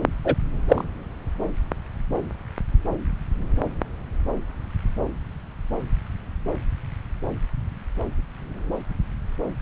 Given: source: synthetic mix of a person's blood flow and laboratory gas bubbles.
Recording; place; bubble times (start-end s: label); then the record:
Doppler ultrasound of blood flow; subclavian vein
0.25-0.35 s: bubbles
0.68-0.84 s: bubbles
From the record:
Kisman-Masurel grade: 113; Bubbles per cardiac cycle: 1 to 2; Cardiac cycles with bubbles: 1 to 10%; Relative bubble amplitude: loud (0.450 to 0.775); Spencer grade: 1 (occasional bubble signal discernible with the cardiac motion signal, with majority of cardiac periods free of bubbles); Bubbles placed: anywhere in the cardiac cycle